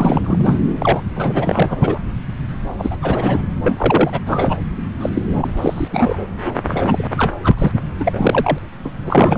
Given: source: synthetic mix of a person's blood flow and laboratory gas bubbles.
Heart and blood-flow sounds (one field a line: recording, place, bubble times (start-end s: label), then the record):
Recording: Doppler ultrasound of blood flow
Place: subclavian vein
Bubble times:
0.00-0.59 s: bubbles
0.80-1.00 s: bubbles
1.15-2.01 s: bubbles
2.79-2.97 s: bubbles
3.02-3.42 s: bubbles
3.64-4.20 s: bubbles
4.27-4.55 s: bubbles
5.00-5.09 s: bubbles
5.15-5.23 s: bubbles
5.36-5.88 s: bubbles
5.91-6.27 s: bubbles
6.34-6.53 s: bubbles
6.67-7.08 s: bubbles
7.17-7.33 s: bubbles
7.43-7.72 s: bubbles
8.00-8.58 s: bubbles
8.84-8.90 s: bubbles
9.01-9.38 s: bubbles
From the record:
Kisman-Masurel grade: 343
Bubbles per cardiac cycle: rolling drumbeat, 9 or more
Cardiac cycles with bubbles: 100%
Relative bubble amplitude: loud (0.450 to 0.775)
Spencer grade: 3 (all of the cardiac periods contain showers or single bubble signals, but not dominating or overriding the cardiac motion signals)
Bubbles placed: anywhere in the cardiac cycle